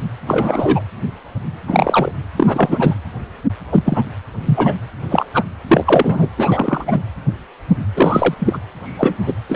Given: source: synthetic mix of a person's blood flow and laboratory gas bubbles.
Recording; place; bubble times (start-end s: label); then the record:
Doppler ultrasound of blood flow; precordium
0.27-0.82 s: bubbles
1.67-2.12 s: bubbles
2.37-2.95 s: bubbles
3.72-4.04 s: bubbles
4.46-4.73 s: bubbles
5.09-5.26 s: bubbles
5.33-5.44 s: bubbles
5.67-6.28 s: bubbles
6.38-7.02 s: bubbles
7.95-8.34 s: bubbles
8.39-8.58 s: bubbles
8.84-9.34 s: bubbles
9.49-9.56 s: bubbles
From the record:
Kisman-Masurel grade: 233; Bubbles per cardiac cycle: several, 3 to 8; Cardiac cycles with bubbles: 50 to 99%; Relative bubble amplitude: loud (0.450 to 0.775); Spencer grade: 3 (all of the cardiac periods contain showers or single bubble signals, but not dominating or overriding the cardiac motion signals); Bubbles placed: anywhere in the cardiac cycle